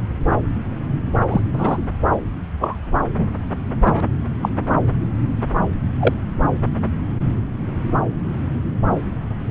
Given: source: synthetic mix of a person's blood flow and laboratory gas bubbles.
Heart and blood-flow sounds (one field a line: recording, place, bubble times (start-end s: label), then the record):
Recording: Doppler ultrasound of blood flow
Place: subclavian vein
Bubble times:
1.29-1.41 s: bubbles
1.53-1.77 s: bubbles
2.60-2.76 s: bubbles
3.14-3.26 s: bubbles
3.84-4.00 s: bubbles
4.42-4.49 s: bubbles
5.99-6.14 s: bubbles
From the record:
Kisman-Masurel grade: 123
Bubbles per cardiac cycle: 1 to 2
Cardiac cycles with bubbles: 10 to 50%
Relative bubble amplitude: loud (0.450 to 0.775)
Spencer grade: 2 (many but less than half of the cardiac periods contain bubble signals, singularly or in groups)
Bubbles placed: anywhere in the cardiac cycle